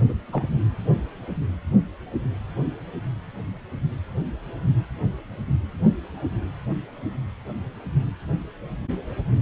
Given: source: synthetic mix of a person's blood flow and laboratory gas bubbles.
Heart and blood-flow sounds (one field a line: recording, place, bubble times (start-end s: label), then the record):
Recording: Doppler ultrasound of blood flow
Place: precordium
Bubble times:
0.09-0.13 s: bubbles
0.27-0.52 s: bubbles
From the record:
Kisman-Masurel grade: 211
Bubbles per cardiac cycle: several, 3 to 8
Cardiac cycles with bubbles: 1 to 10%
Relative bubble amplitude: barely perceptible (0.100 to 0.250)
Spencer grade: 1 (occasional bubble signal discernible with the cardiac motion signal, with majority of cardiac periods free of bubbles)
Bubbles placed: anywhere in the cardiac cycle